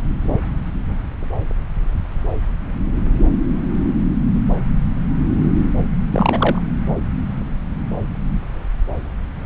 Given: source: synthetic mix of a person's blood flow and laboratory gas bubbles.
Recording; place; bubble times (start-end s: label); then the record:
Doppler ultrasound of blood flow; subclavian vein
6.11-6.60 s: bubbles
From the record:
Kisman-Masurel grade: 212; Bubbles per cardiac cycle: several, 3 to 8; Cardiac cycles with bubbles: 1 to 10%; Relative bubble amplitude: moderate (0.250 to 0.450); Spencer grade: 1 (occasional bubble signal discernible with the cardiac motion signal, with majority of cardiac periods free of bubbles); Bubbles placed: anywhere in the cardiac cycle